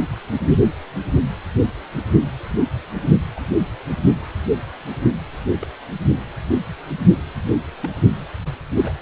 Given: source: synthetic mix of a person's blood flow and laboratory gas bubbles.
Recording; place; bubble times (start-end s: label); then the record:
Doppler ultrasound of blood flow; precordium
3.36-3.39 s: bubbles
5.60-5.65 s: bubbles
7.80-7.90 s: bubbles
8.82-8.92 s: bubbles
From the record:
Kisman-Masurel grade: 121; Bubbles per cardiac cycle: 1 to 2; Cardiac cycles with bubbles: 10 to 50%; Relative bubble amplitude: barely perceptible (0.100 to 0.250); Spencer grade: 2 (many but less than half of the cardiac periods contain bubble signals, singularly or in groups); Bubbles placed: anywhere in the cardiac cycle